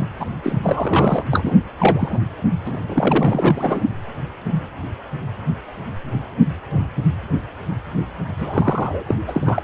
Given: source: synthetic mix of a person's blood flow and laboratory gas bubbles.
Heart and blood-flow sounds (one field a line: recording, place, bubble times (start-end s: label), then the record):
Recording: Doppler ultrasound of blood flow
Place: precordium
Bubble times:
0.00-0.05 s: bubbles
0.20-0.25 s: bubbles
0.43-0.59 s: bubbles
0.62-1.24 s: bubbles
1.31-1.57 s: bubbles
1.78-2.19 s: bubbles
2.65-2.77 s: bubbles
2.87-3.81 s: bubbles
8.37-9.03 s: bubbles
9.06-9.15 s: bubbles
9.28-9.62 s: bubbles
From the record:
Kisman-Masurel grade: 333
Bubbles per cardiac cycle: rolling drumbeat, 9 or more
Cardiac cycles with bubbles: 50 to 99%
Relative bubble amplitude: loud (0.450 to 0.775)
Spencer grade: 3 (all of the cardiac periods contain showers or single bubble signals, but not dominating or overriding the cardiac motion signals)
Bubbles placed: anywhere in the cardiac cycle